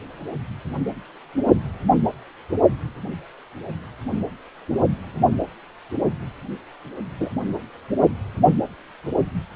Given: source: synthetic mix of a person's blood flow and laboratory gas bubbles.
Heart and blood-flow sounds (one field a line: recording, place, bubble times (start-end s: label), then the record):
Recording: Doppler ultrasound of blood flow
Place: precordium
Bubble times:
7.20-7.29 s: bubbles
From the record:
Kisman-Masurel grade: 123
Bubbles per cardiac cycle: 1 to 2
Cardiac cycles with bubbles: 10 to 50%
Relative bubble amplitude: loud (0.450 to 0.775)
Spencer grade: 2 (many but less than half of the cardiac periods contain bubble signals, singularly or in groups)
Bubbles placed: only in the low amplitude regions of the cardiac cycle